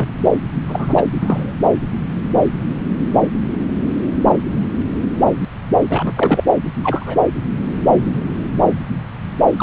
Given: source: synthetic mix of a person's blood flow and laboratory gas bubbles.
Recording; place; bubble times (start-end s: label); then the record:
Doppler ultrasound of blood flow; subclavian vein
0.00-0.08 s: bubbles
0.24-0.30 s: bubbles
0.68-1.04 s: bubbles
1.14-1.56 s: bubbles
1.59-1.66 s: bubbles
5.89-6.12 s: bubbles
6.16-6.44 s: bubbles
6.83-7.21 s: bubbles
9.59-9.63 s: bubbles
From the record:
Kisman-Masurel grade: 222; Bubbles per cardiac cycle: several, 3 to 8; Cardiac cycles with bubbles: 10 to 50%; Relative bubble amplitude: moderate (0.250 to 0.450); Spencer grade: 2 (many but less than half of the cardiac periods contain bubble signals, singularly or in groups); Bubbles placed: anywhere in the cardiac cycle